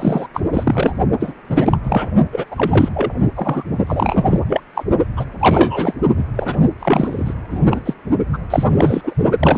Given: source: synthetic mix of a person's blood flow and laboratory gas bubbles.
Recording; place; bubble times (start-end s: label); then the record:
Doppler ultrasound of blood flow; precordium
0.00-0.26 s: bubbles
0.34-0.40 s: bubbles
0.53-0.95 s: bubbles
1.19-1.34 s: bubbles
1.49-1.78 s: bubbles
1.83-2.09 s: bubbles
2.32-2.45 s: bubbles
2.51-2.89 s: bubbles
2.94-3.12 s: bubbles
3.35-3.63 s: bubbles
3.87-4.41 s: bubbles
4.48-4.61 s: bubbles
4.75-4.83 s: bubbles
5.17-5.25 s: bubbles
5.39-5.94 s: bubbles
6.17-6.24 s: bubbles
6.36-6.63 s: bubbles
6.79-7.33 s: bubbles
7.50-7.80 s: bubbles
7.85-7.94 s: bubbles
8.33-8.38 s: bubbles
8.50-8.64 s: bubbles
8.68-9.14 s: bubbles
9.39-9.58 s: bubbles
From the record:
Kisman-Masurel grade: 333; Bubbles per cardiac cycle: rolling drumbeat, 9 or more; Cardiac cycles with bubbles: 50 to 99%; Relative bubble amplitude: loud (0.450 to 0.775); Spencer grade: 3 (all of the cardiac periods contain showers or single bubble signals, but not dominating or overriding the cardiac motion signals); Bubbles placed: only in the low amplitude regions of the cardiac cycle